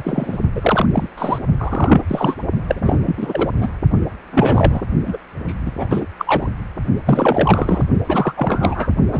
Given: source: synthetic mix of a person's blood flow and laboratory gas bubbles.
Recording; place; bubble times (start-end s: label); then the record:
Doppler ultrasound of blood flow; precordium
0.00-0.39 s: bubbles
0.55-0.87 s: bubbles
0.93-1.09 s: bubbles
1.18-1.39 s: bubbles
1.57-2.01 s: bubbles
2.07-2.34 s: bubbles
2.68-2.98 s: bubbles
3.05-3.50 s: bubbles
3.58-3.69 s: bubbles
4.32-4.86 s: bubbles
5.06-5.17 s: bubbles
5.46-5.54 s: bubbles
5.65-5.71 s: bubbles
5.77-5.88 s: bubbles
5.90-6.06 s: bubbles
6.18-6.48 s: bubbles
7.05-7.84 s: bubbles
8.08-8.92 s: bubbles
9.11-9.20 s: bubbles
From the record:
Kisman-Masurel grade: 343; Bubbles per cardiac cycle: rolling drumbeat, 9 or more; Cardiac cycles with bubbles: 100%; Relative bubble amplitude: loud (0.450 to 0.775); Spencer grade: 3 (all of the cardiac periods contain showers or single bubble signals, but not dominating or overriding the cardiac motion signals); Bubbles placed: only in the low amplitude regions of the cardiac cycle